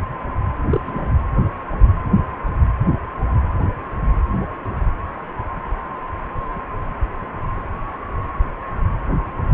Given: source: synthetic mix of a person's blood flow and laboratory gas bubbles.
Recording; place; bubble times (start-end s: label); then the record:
Doppler ultrasound of blood flow; precordium
0.69-0.81 s: bubbles
0.86-1.12 s: bubbles
From the record:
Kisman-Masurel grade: 112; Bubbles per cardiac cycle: 1 to 2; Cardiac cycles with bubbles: 1 to 10%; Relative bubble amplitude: moderate (0.250 to 0.450); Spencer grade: 1 (occasional bubble signal discernible with the cardiac motion signal, with majority of cardiac periods free of bubbles); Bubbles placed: anywhere in the cardiac cycle